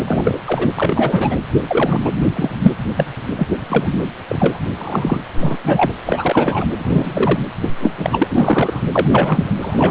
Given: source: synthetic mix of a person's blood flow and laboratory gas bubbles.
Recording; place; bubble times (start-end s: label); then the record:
Doppler ultrasound of blood flow; precordium
0.07-0.41 s: bubbles
0.47-0.70 s: bubbles
0.76-1.36 s: bubbles
1.67-2.01 s: bubbles
2.04-2.10 s: bubbles
2.36-2.50 s: bubbles
2.62-2.73 s: bubbles
2.96-3.06 s: bubbles
3.37-3.47 s: bubbles
3.50-3.58 s: bubbles
3.69-3.90 s: bubbles
4.29-4.59 s: bubbles
4.76-5.18 s: bubbles
5.41-5.58 s: bubbles
5.64-5.92 s: bubbles
6.05-6.65 s: bubbles
6.79-7.39 s: bubbles
7.62-7.92 s: bubbles
7.97-8.87 s: bubbles
8.92-9.54 s: bubbles
9.62-9.91 s: bubbles
From the record:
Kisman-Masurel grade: 243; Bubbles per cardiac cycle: several, 3 to 8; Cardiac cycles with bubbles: 100%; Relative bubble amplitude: loud (0.450 to 0.775); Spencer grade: 3 (all of the cardiac periods contain showers or single bubble signals, but not dominating or overriding the cardiac motion signals); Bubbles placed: anywhere in the cardiac cycle